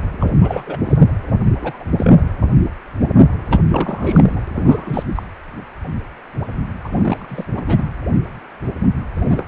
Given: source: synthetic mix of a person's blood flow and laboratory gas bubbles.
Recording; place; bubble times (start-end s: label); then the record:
Doppler ultrasound of blood flow; precordium
0.20-0.33 s: bubbles
0.42-0.77 s: bubbles
0.86-0.97 s: bubbles
1.44-1.84 s: bubbles
1.98-2.23 s: bubbles
3.50-3.62 s: bubbles
3.69-4.51 s: bubbles
4.57-5.03 s: bubbles
5.15-5.22 s: bubbles
6.84-7.45 s: bubbles
7.55-7.62 s: bubbles
7.67-7.90 s: bubbles
9.15-9.46 s: bubbles
From the record:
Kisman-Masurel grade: 232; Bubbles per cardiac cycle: several, 3 to 8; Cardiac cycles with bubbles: 50 to 99%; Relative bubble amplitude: moderate (0.250 to 0.450); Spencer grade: 3 (all of the cardiac periods contain showers or single bubble signals, but not dominating or overriding the cardiac motion signals); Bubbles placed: anywhere in the cardiac cycle